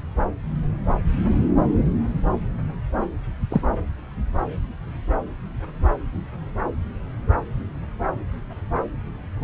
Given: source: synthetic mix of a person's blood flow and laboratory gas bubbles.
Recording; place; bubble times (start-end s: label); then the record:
Doppler ultrasound of blood flow; subclavian vein
3.50-3.61 s: bubbles
From the record:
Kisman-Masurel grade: 112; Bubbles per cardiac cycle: 1 to 2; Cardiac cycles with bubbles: 1 to 10%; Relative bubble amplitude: moderate (0.250 to 0.450); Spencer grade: 1 (occasional bubble signal discernible with the cardiac motion signal, with majority of cardiac periods free of bubbles); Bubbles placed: anywhere in the cardiac cycle